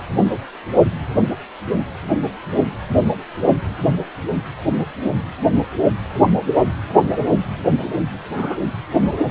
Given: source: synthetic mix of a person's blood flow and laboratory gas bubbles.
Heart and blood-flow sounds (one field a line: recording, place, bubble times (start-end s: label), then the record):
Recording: Doppler ultrasound of blood flow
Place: precordium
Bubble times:
8.37-8.57 s: bubbles
9.29-9.31 s: bubbles
From the record:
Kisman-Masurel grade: 122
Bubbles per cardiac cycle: 1 to 2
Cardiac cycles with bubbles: 10 to 50%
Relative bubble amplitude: moderate (0.250 to 0.450)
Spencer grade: 2 (many but less than half of the cardiac periods contain bubble signals, singularly or in groups)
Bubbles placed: only in the low amplitude regions of the cardiac cycle